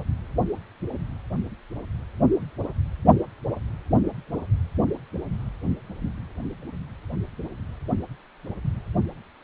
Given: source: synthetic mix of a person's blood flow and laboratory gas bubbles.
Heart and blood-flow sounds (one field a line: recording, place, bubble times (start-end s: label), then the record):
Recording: Doppler ultrasound of blood flow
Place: precordium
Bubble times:
no bubbles
From the record:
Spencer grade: 0 (complete lack of bubble signals)